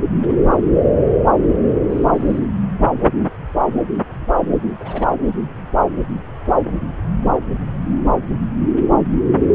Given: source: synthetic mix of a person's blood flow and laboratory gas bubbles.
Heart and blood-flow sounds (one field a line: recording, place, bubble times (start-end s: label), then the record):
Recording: Doppler ultrasound of blood flow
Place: subclavian vein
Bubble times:
0.51-0.90 s: bubbles
1.90-2.40 s: bubbles
4.79-5.07 s: bubbles
6.65-6.73 s: bubbles
From the record:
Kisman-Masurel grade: 121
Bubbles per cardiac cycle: 1 to 2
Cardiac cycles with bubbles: 10 to 50%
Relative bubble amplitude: barely perceptible (0.100 to 0.250)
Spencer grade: 2 (many but less than half of the cardiac periods contain bubble signals, singularly or in groups)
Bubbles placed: anywhere in the cardiac cycle